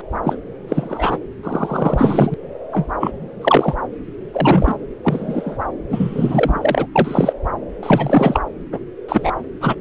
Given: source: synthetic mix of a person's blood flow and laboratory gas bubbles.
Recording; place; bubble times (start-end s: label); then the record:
Doppler ultrasound of blood flow; subclavian vein
0.24-0.38 s: bubbles
0.67-1.19 s: bubbles
1.43-2.34 s: bubbles
2.73-2.87 s: bubbles
3.00-3.11 s: bubbles
3.42-3.75 s: bubbles
4.33-4.76 s: bubbles
5.04-5.57 s: bubbles
5.89-6.86 s: bubbles
6.95-7.33 s: bubbles
7.82-8.40 s: bubbles
8.72-8.79 s: bubbles
9.08-9.31 s: bubbles
9.61-9.75 s: bubbles
From the record:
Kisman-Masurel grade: 243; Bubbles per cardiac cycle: several, 3 to 8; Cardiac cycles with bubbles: 100%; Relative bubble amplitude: loud (0.450 to 0.775); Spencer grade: 3 (all of the cardiac periods contain showers or single bubble signals, but not dominating or overriding the cardiac motion signals); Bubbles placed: anywhere in the cardiac cycle